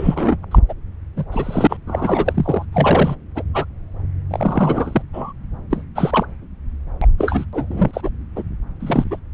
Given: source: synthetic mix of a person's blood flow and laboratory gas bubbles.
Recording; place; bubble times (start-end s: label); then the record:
Doppler ultrasound of blood flow; subclavian vein
0.00-0.36 s: bubbles
0.42-0.44 s: bubbles
0.51-0.58 s: bubbles
0.68-0.74 s: bubbles
1.16-1.25 s: bubbles
1.31-1.77 s: bubbles
1.86-2.65 s: bubbles
2.72-3.15 s: bubbles
3.35-3.42 s: bubbles
3.53-3.65 s: bubbles
4.30-5.02 s: bubbles
5.13-5.33 s: bubbles
5.70-5.84 s: bubbles
5.95-6.26 s: bubbles
7.01-7.07 s: bubbles
7.18-7.45 s: bubbles
7.52-8.09 s: bubbles
8.35-8.43 s: bubbles
8.79-9.20 s: bubbles
From the record:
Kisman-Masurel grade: 343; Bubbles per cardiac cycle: rolling drumbeat, 9 or more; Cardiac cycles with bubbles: 100%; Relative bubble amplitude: loud (0.450 to 0.775); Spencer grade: 3 (all of the cardiac periods contain showers or single bubble signals, but not dominating or overriding the cardiac motion signals); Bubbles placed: anywhere in the cardiac cycle